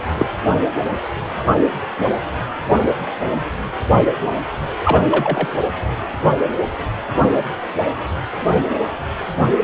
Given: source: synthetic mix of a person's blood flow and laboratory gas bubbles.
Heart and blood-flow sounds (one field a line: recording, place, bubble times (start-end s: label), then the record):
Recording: Doppler ultrasound of blood flow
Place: precordium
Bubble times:
0.17-0.27 s: bubbles
4.85-5.49 s: bubbles
From the record:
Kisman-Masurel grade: 223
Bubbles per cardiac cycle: several, 3 to 8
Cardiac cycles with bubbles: 10 to 50%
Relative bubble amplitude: loud (0.450 to 0.775)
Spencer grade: 2 (many but less than half of the cardiac periods contain bubble signals, singularly or in groups)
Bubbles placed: anywhere in the cardiac cycle